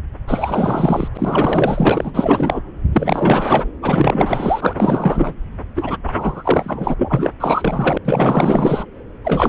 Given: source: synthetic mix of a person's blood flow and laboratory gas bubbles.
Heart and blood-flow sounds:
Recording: Doppler ultrasound of blood flow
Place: subclavian vein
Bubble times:
0.28-1.08 s: bubbles
1.14-2.12 s: bubbles
2.14-2.61 s: bubbles
2.93-3.71 s: bubbles
3.82-5.33 s: bubbles
5.75-5.96 s: bubbles
6.07-6.94 s: bubbles
6.97-7.30 s: bubbles
7.40-7.98 s: bubbles
8.04-8.86 s: bubbles
9.24-9.48 s: bubbles
From the record:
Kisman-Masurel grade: 444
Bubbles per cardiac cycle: continuous sound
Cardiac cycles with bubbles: 100%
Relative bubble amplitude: maximal (0.775 to 0.999)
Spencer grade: 4 (maximum detectable bubble signal sounding continuously throughout systole and diastole of every cardiac period, and overriding the amplitude of the normal cardiac signals)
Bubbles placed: anywhere in the cardiac cycle

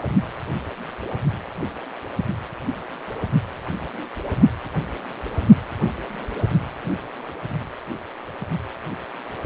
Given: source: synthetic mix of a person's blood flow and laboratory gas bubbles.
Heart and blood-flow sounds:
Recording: Doppler ultrasound of blood flow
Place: precordium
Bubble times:
no bubbles
From the record:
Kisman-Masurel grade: 000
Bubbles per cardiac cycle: 0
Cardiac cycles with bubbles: 0%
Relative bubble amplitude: no bubbles discernible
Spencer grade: 0 (complete lack of bubble signals)

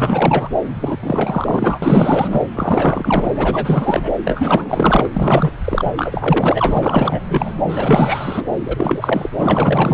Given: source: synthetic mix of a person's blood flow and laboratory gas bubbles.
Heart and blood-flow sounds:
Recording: Doppler ultrasound of blood flow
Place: subclavian vein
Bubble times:
0.00-0.49 s: bubbles
0.80-0.98 s: bubbles
1.02-1.79 s: bubbles
1.82-2.46 s: bubbles
2.54-3.32 s: bubbles
3.36-4.12 s: bubbles
4.25-5.10 s: bubbles
5.13-5.53 s: bubbles
5.64-5.92 s: bubbles
5.96-7.54 s: bubbles
7.68-8.46 s: bubbles
8.66-9.29 s: bubbles
9.38-9.94 s: bubbles
From the record:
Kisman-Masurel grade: 444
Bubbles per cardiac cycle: continuous sound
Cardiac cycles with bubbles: 100%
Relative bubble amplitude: maximal (0.775 to 0.999)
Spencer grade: 4 (maximum detectable bubble signal sounding continuously throughout systole and diastole of every cardiac period, and overriding the amplitude of the normal cardiac signals)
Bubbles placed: anywhere in the cardiac cycle

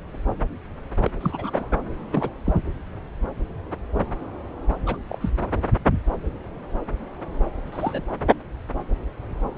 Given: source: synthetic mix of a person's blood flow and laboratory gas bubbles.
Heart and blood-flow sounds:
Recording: Doppler ultrasound of blood flow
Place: subclavian vein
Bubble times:
1.02-1.10 s: bubbles
1.20-1.68 s: bubbles
2.12-2.31 s: bubbles
2.44-2.62 s: bubbles
4.86-4.97 s: bubbles
5.09-5.29 s: bubbles
7.72-8.02 s: bubbles
From the record:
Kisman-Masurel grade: 221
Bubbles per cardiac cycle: several, 3 to 8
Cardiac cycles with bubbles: 10 to 50%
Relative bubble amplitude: barely perceptible (0.100 to 0.250)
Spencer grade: 2 (many but less than half of the cardiac periods contain bubble signals, singularly or in groups)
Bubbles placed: anywhere in the cardiac cycle

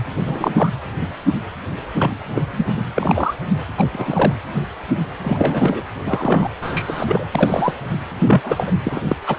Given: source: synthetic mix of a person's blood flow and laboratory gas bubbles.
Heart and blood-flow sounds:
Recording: Doppler ultrasound of blood flow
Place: precordium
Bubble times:
0.16-0.69 s: bubbles
1.96-2.15 s: bubbles
2.33-2.43 s: bubbles
2.46-2.77 s: bubbles
2.94-3.34 s: bubbles
3.76-3.89 s: bubbles
3.92-4.33 s: bubbles
5.24-5.82 s: bubbles
6.04-6.50 s: bubbles
6.62-7.24 s: bubbles
7.31-7.74 s: bubbles
8.26-8.73 s: bubbles
8.85-9.00 s: bubbles
9.07-9.16 s: bubbles
9.27-9.36 s: bubbles
From the record:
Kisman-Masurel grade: 232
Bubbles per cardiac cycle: several, 3 to 8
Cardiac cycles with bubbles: 50 to 99%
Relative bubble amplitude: moderate (0.250 to 0.450)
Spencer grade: 3 (all of the cardiac periods contain showers or single bubble signals, but not dominating or overriding the cardiac motion signals)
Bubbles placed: anywhere in the cardiac cycle

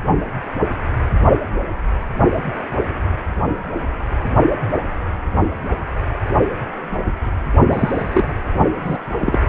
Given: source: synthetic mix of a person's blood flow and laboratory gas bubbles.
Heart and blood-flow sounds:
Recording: Doppler ultrasound of blood flow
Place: precordium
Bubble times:
7.70-8.33 s: bubbles
8.83-9.10 s: bubbles
9.19-9.37 s: bubbles
From the record:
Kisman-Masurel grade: 223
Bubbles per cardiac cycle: several, 3 to 8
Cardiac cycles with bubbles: 10 to 50%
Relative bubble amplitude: loud (0.450 to 0.775)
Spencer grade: 2 (many but less than half of the cardiac periods contain bubble signals, singularly or in groups)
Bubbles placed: only in the low amplitude regions of the cardiac cycle

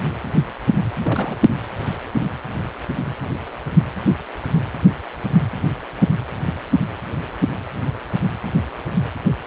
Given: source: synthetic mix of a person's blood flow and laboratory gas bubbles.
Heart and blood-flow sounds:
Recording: Doppler ultrasound of blood flow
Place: precordium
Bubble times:
1.01-1.36 s: bubbles
From the record:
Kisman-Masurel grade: 211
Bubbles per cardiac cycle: several, 3 to 8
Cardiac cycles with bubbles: 1 to 10%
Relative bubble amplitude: barely perceptible (0.100 to 0.250)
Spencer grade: 1 (occasional bubble signal discernible with the cardiac motion signal, with majority of cardiac periods free of bubbles)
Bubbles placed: anywhere in the cardiac cycle

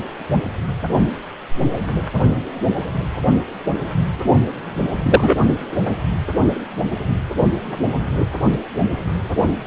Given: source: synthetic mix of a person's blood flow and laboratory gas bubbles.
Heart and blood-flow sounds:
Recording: Doppler ultrasound of blood flow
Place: precordium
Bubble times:
5.03-5.36 s: bubbles
From the record:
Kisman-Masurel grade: 213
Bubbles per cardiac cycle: several, 3 to 8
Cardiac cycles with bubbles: 1 to 10%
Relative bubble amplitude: loud (0.450 to 0.775)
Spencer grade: 1 (occasional bubble signal discernible with the cardiac motion signal, with majority of cardiac periods free of bubbles)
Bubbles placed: only in the low amplitude regions of the cardiac cycle

